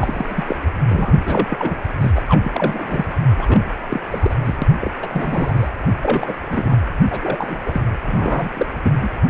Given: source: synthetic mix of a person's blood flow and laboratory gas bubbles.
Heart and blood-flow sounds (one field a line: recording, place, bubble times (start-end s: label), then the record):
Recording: Doppler ultrasound of blood flow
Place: precordium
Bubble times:
0.00-0.56 s: bubbles
0.89-1.18 s: bubbles
1.25-1.47 s: bubbles
1.50-1.79 s: bubbles
2.00-2.12 s: bubbles
2.15-2.23 s: bubbles
2.29-2.50 s: bubbles
2.54-3.12 s: bubbles
3.33-3.60 s: bubbles
3.90-4.01 s: bubbles
4.11-4.35 s: bubbles
4.43-4.57 s: bubbles
4.62-4.67 s: bubbles
4.80-4.91 s: bubbles
5.01-5.68 s: bubbles
6.00-6.33 s: bubbles
6.47-6.79 s: bubbles
7.08-7.18 s: bubbles
7.22-7.60 s: bubbles
7.66-7.81 s: bubbles
8.06-8.49 s: bubbles
8.54-8.66 s: bubbles
8.83-9.10 s: bubbles
From the record:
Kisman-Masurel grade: 342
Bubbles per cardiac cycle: rolling drumbeat, 9 or more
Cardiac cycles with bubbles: 100%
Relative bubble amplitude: moderate (0.250 to 0.450)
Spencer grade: 3 (all of the cardiac periods contain showers or single bubble signals, but not dominating or overriding the cardiac motion signals)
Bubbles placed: anywhere in the cardiac cycle